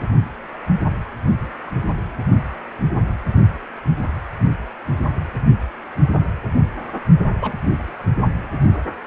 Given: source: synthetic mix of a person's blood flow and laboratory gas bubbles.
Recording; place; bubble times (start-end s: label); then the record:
Doppler ultrasound of blood flow; precordium
7.41-7.58 s: bubbles
From the record:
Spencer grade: 1 (occasional bubble signal discernible with the cardiac motion signal, with majority of cardiac periods free of bubbles); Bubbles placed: only in the low amplitude regions of the cardiac cycle